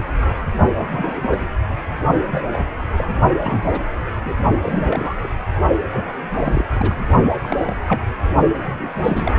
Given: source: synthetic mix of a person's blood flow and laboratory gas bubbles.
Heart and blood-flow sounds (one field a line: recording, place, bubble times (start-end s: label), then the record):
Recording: Doppler ultrasound of blood flow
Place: precordium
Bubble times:
0.76-1.50 s: bubbles
2.23-2.65 s: bubbles
2.96-3.07 s: bubbles
3.40-3.81 s: bubbles
4.25-4.34 s: bubbles
4.62-5.14 s: bubbles
5.22-5.29 s: bubbles
5.92-6.15 s: bubbles
6.39-6.66 s: bubbles
6.75-7.08 s: bubbles
7.41-7.76 s: bubbles
7.88-8.03 s: bubbles
8.66-8.89 s: bubbles
8.96-9.39 s: bubbles
From the record:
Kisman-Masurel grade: 232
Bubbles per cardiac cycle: several, 3 to 8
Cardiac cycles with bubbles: 50 to 99%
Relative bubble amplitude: moderate (0.250 to 0.450)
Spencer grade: 3 (all of the cardiac periods contain showers or single bubble signals, but not dominating or overriding the cardiac motion signals)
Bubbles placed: only in the low amplitude regions of the cardiac cycle